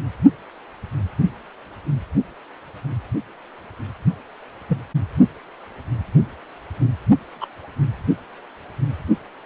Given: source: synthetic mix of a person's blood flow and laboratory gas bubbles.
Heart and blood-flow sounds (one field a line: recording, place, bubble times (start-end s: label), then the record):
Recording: Doppler ultrasound of blood flow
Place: precordium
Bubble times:
4.69-4.78 s: bubbles
7.40-7.46 s: bubbles
From the record:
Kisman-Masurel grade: 122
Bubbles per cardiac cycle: 1 to 2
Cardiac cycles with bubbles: 10 to 50%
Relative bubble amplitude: moderate (0.250 to 0.450)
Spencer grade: 2 (many but less than half of the cardiac periods contain bubble signals, singularly or in groups)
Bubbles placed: only in the low amplitude regions of the cardiac cycle